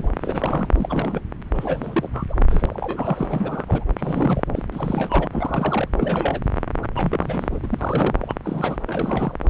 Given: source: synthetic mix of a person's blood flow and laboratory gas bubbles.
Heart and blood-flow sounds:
Doppler ultrasound of blood flow; subclavian vein
0.00-0.09 s: bubbles
0.21-0.69 s: bubbles
0.74-1.21 s: bubbles
1.53-2.09 s: bubbles
2.12-2.25 s: bubbles
2.29-2.35 s: bubbles
2.50-3.25 s: bubbles
3.29-3.85 s: bubbles
3.97-4.43 s: bubbles
4.53-4.62 s: bubbles
4.72-5.29 s: bubbles
5.32-5.88 s: bubbles
5.98-6.42 s: bubbles
6.83-6.87 s: bubbles
6.95-7.59 s: bubbles
7.63-8.15 s: bubbles
8.21-8.34 s: bubbles
8.44-8.76 s: bubbles
8.87-9.34 s: bubbles
From the record:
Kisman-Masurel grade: 342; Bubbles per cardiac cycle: rolling drumbeat, 9 or more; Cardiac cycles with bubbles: 100%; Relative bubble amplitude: moderate (0.250 to 0.450); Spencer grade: 3 (all of the cardiac periods contain showers or single bubble signals, but not dominating or overriding the cardiac motion signals); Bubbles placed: anywhere in the cardiac cycle

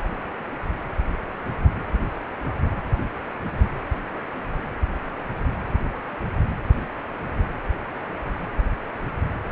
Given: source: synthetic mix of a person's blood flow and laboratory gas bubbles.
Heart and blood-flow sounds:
Doppler ultrasound of blood flow; precordium
no bubbles
From the record:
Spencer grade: 0 (complete lack of bubble signals)

